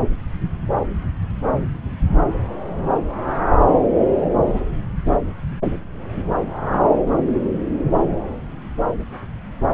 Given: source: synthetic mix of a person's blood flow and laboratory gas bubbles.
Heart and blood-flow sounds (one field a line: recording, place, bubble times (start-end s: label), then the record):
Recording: Doppler ultrasound of blood flow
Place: subclavian vein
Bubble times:
no bubbles
From the record:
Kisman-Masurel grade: 000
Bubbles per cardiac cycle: 0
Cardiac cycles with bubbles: 0%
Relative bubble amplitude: no bubbles discernible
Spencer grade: 0 (complete lack of bubble signals)